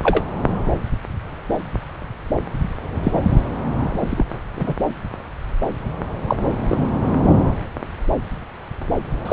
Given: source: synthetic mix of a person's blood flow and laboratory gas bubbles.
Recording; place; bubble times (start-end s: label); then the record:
Doppler ultrasound of blood flow; subclavian vein
0.03-0.23 s: bubbles
3.03-3.22 s: bubbles
3.80-4.23 s: bubbles
4.56-4.73 s: bubbles
6.28-6.36 s: bubbles
6.69-6.91 s: bubbles
9.25-9.33 s: bubbles
From the record:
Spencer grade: 2 (many but less than half of the cardiac periods contain bubble signals, singularly or in groups); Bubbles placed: anywhere in the cardiac cycle